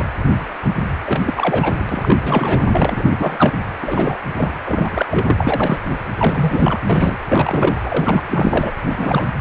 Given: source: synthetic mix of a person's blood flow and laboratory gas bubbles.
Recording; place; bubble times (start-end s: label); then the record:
Doppler ultrasound of blood flow; precordium
0.00-0.07 s: bubbles
1.06-1.33 s: bubbles
1.36-1.84 s: bubbles
1.89-2.17 s: bubbles
2.22-2.65 s: bubbles
2.71-3.15 s: bubbles
3.17-3.54 s: bubbles
3.82-4.17 s: bubbles
4.32-4.52 s: bubbles
4.66-5.05 s: bubbles
5.10-5.78 s: bubbles
6.15-6.79 s: bubbles
6.89-7.17 s: bubbles
7.28-7.78 s: bubbles
7.83-8.22 s: bubbles
8.29-8.71 s: bubbles
8.85-9.27 s: bubbles
From the record:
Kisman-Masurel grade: 332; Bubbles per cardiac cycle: rolling drumbeat, 9 or more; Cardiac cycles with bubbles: 50 to 99%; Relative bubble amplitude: moderate (0.250 to 0.450); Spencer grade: 3 (all of the cardiac periods contain showers or single bubble signals, but not dominating or overriding the cardiac motion signals); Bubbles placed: anywhere in the cardiac cycle